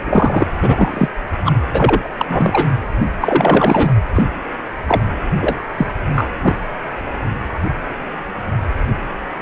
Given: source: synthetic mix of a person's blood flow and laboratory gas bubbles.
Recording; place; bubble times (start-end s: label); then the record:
Doppler ultrasound of blood flow; precordium
0.05-0.48 s: bubbles
0.62-1.08 s: bubbles
1.45-1.53 s: bubbles
1.73-2.14 s: bubbles
2.17-2.25 s: bubbles
2.28-2.69 s: bubbles
3.21-3.91 s: bubbles
4.14-4.24 s: bubbles
4.87-5.01 s: bubbles
5.40-5.67 s: bubbles
5.78-5.87 s: bubbles
6.15-6.35 s: bubbles
6.42-6.55 s: bubbles
From the record:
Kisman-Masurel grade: 233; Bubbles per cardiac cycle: several, 3 to 8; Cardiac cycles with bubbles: 50 to 99%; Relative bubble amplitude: loud (0.450 to 0.775); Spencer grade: 3 (all of the cardiac periods contain showers or single bubble signals, but not dominating or overriding the cardiac motion signals); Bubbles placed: anywhere in the cardiac cycle